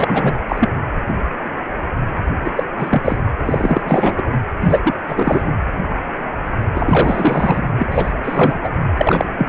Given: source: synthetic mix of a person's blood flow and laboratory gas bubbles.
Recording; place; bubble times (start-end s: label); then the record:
Doppler ultrasound of blood flow; precordium
0.00-0.39 s: bubbles
0.49-0.69 s: bubbles
2.44-2.52 s: bubbles
2.56-2.63 s: bubbles
2.78-3.17 s: bubbles
3.45-3.81 s: bubbles
3.85-4.22 s: bubbles
4.61-4.80 s: bubbles
4.84-4.94 s: bubbles
5.08-5.53 s: bubbles
6.75-7.68 s: bubbles
7.79-7.87 s: bubbles
7.91-8.12 s: bubbles
8.23-8.58 s: bubbles
8.63-8.69 s: bubbles
8.97-9.25 s: bubbles
9.38-9.48 s: bubbles
From the record:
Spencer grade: 3 (all of the cardiac periods contain showers or single bubble signals, but not dominating or overriding the cardiac motion signals); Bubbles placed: anywhere in the cardiac cycle